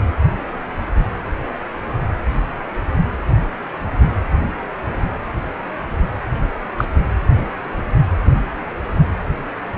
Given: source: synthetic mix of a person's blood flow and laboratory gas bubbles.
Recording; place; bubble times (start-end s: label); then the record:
Doppler ultrasound of blood flow; precordium
6.77-6.85 s: bubbles
From the record:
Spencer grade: 1 (occasional bubble signal discernible with the cardiac motion signal, with majority of cardiac periods free of bubbles); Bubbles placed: anywhere in the cardiac cycle